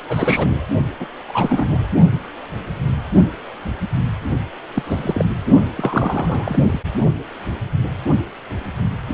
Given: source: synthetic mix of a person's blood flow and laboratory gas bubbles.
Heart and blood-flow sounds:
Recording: Doppler ultrasound of blood flow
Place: precordium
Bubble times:
0.08-0.67 s: bubbles
1.00-1.06 s: bubbles
1.27-1.90 s: bubbles
4.75-4.83 s: bubbles
4.86-5.25 s: bubbles
5.75-6.80 s: bubbles
From the record:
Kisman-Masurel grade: 222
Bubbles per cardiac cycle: several, 3 to 8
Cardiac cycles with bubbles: 10 to 50%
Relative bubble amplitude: moderate (0.250 to 0.450)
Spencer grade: 2 (many but less than half of the cardiac periods contain bubble signals, singularly or in groups)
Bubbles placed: only in the low amplitude regions of the cardiac cycle

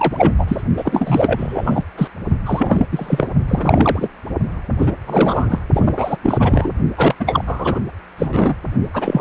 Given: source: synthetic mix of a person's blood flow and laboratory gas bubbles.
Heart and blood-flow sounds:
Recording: Doppler ultrasound of blood flow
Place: precordium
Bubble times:
0.00-0.33 s: bubbles
0.38-0.61 s: bubbles
0.77-1.84 s: bubbles
1.97-2.08 s: bubbles
2.46-2.85 s: bubbles
2.92-3.29 s: bubbles
3.48-4.08 s: bubbles
4.78-4.92 s: bubbles
5.06-5.59 s: bubbles
5.73-6.17 s: bubbles
6.22-6.72 s: bubbles
6.97-7.14 s: bubbles
7.19-7.79 s: bubbles
8.18-8.55 s: bubbles
8.94-9.21 s: bubbles
From the record:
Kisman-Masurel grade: 333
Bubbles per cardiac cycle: rolling drumbeat, 9 or more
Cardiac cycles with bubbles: 50 to 99%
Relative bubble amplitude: loud (0.450 to 0.775)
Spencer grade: 3 (all of the cardiac periods contain showers or single bubble signals, but not dominating or overriding the cardiac motion signals)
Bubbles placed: only in the low amplitude regions of the cardiac cycle

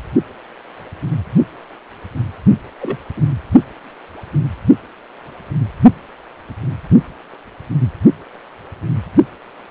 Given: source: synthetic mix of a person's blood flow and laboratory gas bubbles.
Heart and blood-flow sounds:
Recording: Doppler ultrasound of blood flow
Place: precordium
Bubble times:
2.81-2.97 s: bubbles
3.16-3.21 s: bubbles
From the record:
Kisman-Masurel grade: 112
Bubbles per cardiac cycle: 1 to 2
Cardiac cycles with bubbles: 1 to 10%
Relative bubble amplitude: moderate (0.250 to 0.450)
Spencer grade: 1 (occasional bubble signal discernible with the cardiac motion signal, with majority of cardiac periods free of bubbles)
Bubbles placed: anywhere in the cardiac cycle

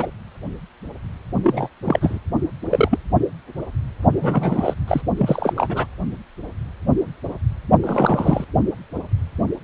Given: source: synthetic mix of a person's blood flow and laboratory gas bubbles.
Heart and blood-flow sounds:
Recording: Doppler ultrasound of blood flow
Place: precordium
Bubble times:
0.00-0.10 s: bubbles
1.43-1.70 s: bubbles
1.84-2.19 s: bubbles
2.71-2.99 s: bubbles
4.17-4.73 s: bubbles
4.88-5.01 s: bubbles
5.18-5.53 s: bubbles
5.55-5.85 s: bubbles
7.83-8.44 s: bubbles
From the record:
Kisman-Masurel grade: 222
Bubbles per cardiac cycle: several, 3 to 8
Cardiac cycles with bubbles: 10 to 50%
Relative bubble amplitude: moderate (0.250 to 0.450)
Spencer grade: 2 (many but less than half of the cardiac periods contain bubble signals, singularly or in groups)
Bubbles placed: only in the low amplitude regions of the cardiac cycle

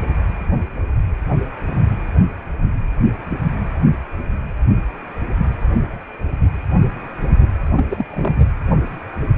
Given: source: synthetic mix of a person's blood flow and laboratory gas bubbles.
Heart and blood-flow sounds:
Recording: Doppler ultrasound of blood flow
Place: precordium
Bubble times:
7.76-7.85 s: bubbles
7.90-8.06 s: bubbles
8.10-8.48 s: bubbles
From the record:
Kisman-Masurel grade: 222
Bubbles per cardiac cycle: several, 3 to 8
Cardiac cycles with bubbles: 10 to 50%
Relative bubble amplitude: moderate (0.250 to 0.450)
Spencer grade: 2 (many but less than half of the cardiac periods contain bubble signals, singularly or in groups)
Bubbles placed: anywhere in the cardiac cycle

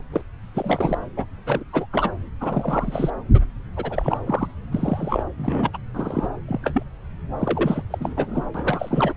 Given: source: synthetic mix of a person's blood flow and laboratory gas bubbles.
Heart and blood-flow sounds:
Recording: Doppler ultrasound of blood flow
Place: subclavian vein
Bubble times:
0.00-0.03 s: bubbles
0.12-0.21 s: bubbles
0.54-0.98 s: bubbles
1.17-1.25 s: bubbles
1.46-1.64 s: bubbles
1.73-1.86 s: bubbles
1.93-2.12 s: bubbles
2.41-3.10 s: bubbles
3.34-3.40 s: bubbles
3.76-4.17 s: bubbles
4.25-4.48 s: bubbles
4.71-5.23 s: bubbles
5.37-5.78 s: bubbles
5.94-6.28 s: bubbles
6.48-6.83 s: bubbles
7.38-7.82 s: bubbles
7.90-8.44 s: bubbles
8.54-9.13 s: bubbles
From the record:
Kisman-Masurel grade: 343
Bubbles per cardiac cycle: rolling drumbeat, 9 or more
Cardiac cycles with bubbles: 100%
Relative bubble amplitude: loud (0.450 to 0.775)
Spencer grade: 3 (all of the cardiac periods contain showers or single bubble signals, but not dominating or overriding the cardiac motion signals)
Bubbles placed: anywhere in the cardiac cycle

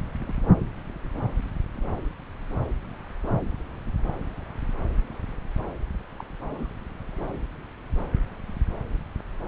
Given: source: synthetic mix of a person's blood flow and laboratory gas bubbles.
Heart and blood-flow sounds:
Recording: Doppler ultrasound of blood flow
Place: subclavian vein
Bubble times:
0.20-0.33 s: bubbles
6.19-6.21 s: bubbles
6.44-6.67 s: bubbles
6.70-6.73 s: bubbles
From the record:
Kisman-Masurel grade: 111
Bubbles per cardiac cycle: 1 to 2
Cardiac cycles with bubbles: 1 to 10%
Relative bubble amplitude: barely perceptible (0.100 to 0.250)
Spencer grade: 1 (occasional bubble signal discernible with the cardiac motion signal, with majority of cardiac periods free of bubbles)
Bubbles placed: anywhere in the cardiac cycle

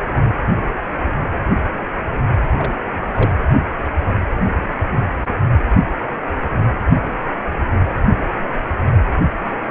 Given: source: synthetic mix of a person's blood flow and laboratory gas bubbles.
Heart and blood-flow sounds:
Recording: Doppler ultrasound of blood flow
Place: precordium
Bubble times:
2.56-2.75 s: bubbles
3.15-3.32 s: bubbles
From the record:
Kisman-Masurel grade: 122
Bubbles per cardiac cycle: 1 to 2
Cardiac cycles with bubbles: 10 to 50%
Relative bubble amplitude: moderate (0.250 to 0.450)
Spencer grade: 2 (many but less than half of the cardiac periods contain bubble signals, singularly or in groups)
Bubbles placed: anywhere in the cardiac cycle

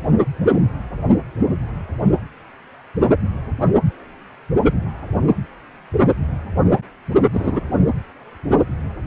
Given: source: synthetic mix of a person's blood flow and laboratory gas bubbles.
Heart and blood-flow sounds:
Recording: Doppler ultrasound of blood flow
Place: precordium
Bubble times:
7.33-7.61 s: bubbles
From the record:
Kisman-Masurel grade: 113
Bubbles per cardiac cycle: 1 to 2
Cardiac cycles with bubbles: 1 to 10%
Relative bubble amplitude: loud (0.450 to 0.775)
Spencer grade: 1 (occasional bubble signal discernible with the cardiac motion signal, with majority of cardiac periods free of bubbles)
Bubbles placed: anywhere in the cardiac cycle

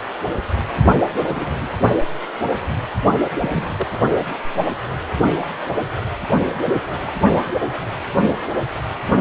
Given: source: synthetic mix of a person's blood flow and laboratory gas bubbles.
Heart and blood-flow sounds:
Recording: Doppler ultrasound of blood flow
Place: precordium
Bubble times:
1.08-1.14 s: bubbles
1.17-1.53 s: bubbles
1.55-1.74 s: bubbles
3.39-3.87 s: bubbles
5.39-5.48 s: bubbles
6.65-6.77 s: bubbles
6.90-7.12 s: bubbles
From the record:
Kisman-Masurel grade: 221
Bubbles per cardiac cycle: several, 3 to 8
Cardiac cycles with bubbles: 10 to 50%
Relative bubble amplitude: barely perceptible (0.100 to 0.250)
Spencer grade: 2 (many but less than half of the cardiac periods contain bubble signals, singularly or in groups)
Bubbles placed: only in the low amplitude regions of the cardiac cycle

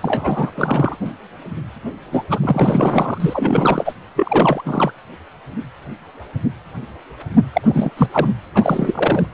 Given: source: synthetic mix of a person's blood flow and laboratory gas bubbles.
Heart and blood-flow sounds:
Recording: Doppler ultrasound of blood flow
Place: precordium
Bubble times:
0.00-0.52 s: bubbles
0.55-0.96 s: bubbles
1.05-1.11 s: bubbles
2.12-2.24 s: bubbles
2.30-2.39 s: bubbles
2.42-3.93 s: bubbles
4.16-4.92 s: bubbles
7.52-7.90 s: bubbles
7.97-8.09 s: bubbles
8.12-8.32 s: bubbles
8.54-9.25 s: bubbles
From the record:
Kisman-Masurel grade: 333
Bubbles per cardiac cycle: rolling drumbeat, 9 or more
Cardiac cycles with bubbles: 50 to 99%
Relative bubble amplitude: loud (0.450 to 0.775)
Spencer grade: 3 (all of the cardiac periods contain showers or single bubble signals, but not dominating or overriding the cardiac motion signals)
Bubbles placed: anywhere in the cardiac cycle

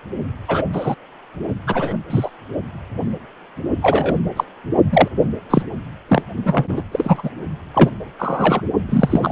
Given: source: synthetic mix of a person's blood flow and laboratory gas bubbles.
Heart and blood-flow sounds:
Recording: Doppler ultrasound of blood flow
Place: precordium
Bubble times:
0.47-0.64 s: bubbles
0.72-0.95 s: bubbles
1.67-1.96 s: bubbles
2.10-2.31 s: bubbles
3.82-4.15 s: bubbles
4.36-4.44 s: bubbles
4.91-5.08 s: bubbles
5.50-5.62 s: bubbles
6.09-6.22 s: bubbles
6.46-6.65 s: bubbles
6.69-6.83 s: bubbles
6.91-7.30 s: bubbles
7.74-7.90 s: bubbles
8.19-8.62 s: bubbles
8.88-9.31 s: bubbles
From the record:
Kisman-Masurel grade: 243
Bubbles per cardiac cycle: several, 3 to 8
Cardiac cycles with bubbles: 100%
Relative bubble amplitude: loud (0.450 to 0.775)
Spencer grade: 3 (all of the cardiac periods contain showers or single bubble signals, but not dominating or overriding the cardiac motion signals)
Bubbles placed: only in the low amplitude regions of the cardiac cycle

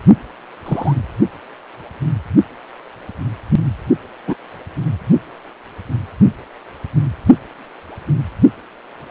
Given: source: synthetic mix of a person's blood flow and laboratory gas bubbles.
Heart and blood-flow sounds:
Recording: Doppler ultrasound of blood flow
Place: precordium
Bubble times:
0.66-0.95 s: bubbles
4.28-4.35 s: bubbles
From the record:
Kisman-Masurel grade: 123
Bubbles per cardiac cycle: 1 to 2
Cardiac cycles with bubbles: 10 to 50%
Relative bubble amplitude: loud (0.450 to 0.775)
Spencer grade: 2 (many but less than half of the cardiac periods contain bubble signals, singularly or in groups)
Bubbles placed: anywhere in the cardiac cycle

